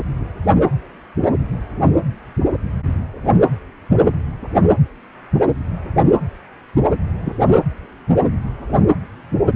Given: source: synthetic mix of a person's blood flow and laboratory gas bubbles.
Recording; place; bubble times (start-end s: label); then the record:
Doppler ultrasound of blood flow; precordium
7.21-7.37 s: bubbles
From the record:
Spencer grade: 1 (occasional bubble signal discernible with the cardiac motion signal, with majority of cardiac periods free of bubbles); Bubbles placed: anywhere in the cardiac cycle